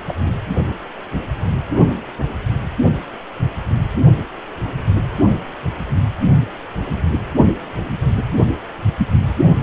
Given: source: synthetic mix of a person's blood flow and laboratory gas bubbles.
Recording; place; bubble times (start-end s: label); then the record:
Doppler ultrasound of blood flow; precordium
0.07-0.36 s: bubbles
From the record:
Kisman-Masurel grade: 111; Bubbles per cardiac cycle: 1 to 2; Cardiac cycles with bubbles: 1 to 10%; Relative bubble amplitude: barely perceptible (0.100 to 0.250); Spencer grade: 1 (occasional bubble signal discernible with the cardiac motion signal, with majority of cardiac periods free of bubbles); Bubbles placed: anywhere in the cardiac cycle